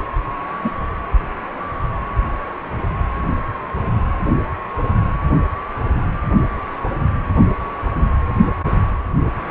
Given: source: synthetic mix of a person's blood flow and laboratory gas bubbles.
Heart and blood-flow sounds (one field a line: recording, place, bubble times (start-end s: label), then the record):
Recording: Doppler ultrasound of blood flow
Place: precordium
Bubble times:
0.64-0.70 s: bubbles
From the record:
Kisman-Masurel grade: 113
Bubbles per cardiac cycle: 1 to 2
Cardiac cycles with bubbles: 1 to 10%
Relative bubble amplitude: loud (0.450 to 0.775)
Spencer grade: 1 (occasional bubble signal discernible with the cardiac motion signal, with majority of cardiac periods free of bubbles)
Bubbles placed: only in the low amplitude regions of the cardiac cycle